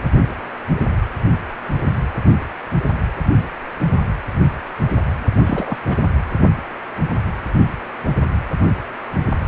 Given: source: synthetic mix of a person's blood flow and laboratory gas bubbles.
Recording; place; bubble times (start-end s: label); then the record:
Doppler ultrasound of blood flow; precordium
5.45-5.77 s: bubbles
5.86-5.95 s: bubbles
From the record:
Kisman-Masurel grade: 212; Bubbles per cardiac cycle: several, 3 to 8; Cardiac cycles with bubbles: 1 to 10%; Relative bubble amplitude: moderate (0.250 to 0.450); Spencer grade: 1 (occasional bubble signal discernible with the cardiac motion signal, with majority of cardiac periods free of bubbles); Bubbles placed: anywhere in the cardiac cycle